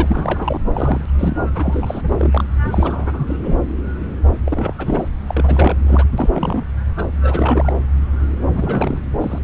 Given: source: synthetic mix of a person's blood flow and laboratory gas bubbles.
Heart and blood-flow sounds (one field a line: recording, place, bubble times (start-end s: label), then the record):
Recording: Doppler ultrasound of blood flow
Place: subclavian vein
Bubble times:
0.00-0.60 s: bubbles
0.74-1.05 s: bubbles
1.18-1.37 s: bubbles
1.54-2.44 s: bubbles
2.62-3.36 s: bubbles
3.43-3.56 s: bubbles
4.46-4.74 s: bubbles
4.78-5.08 s: bubbles
5.27-6.04 s: bubbles
6.18-6.29 s: bubbles
6.32-6.64 s: bubbles
6.98-7.05 s: bubbles
7.23-7.73 s: bubbles
8.53-8.99 s: bubbles
9.21-9.39 s: bubbles
From the record:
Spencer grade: 3 (all of the cardiac periods contain showers or single bubble signals, but not dominating or overriding the cardiac motion signals)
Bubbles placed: anywhere in the cardiac cycle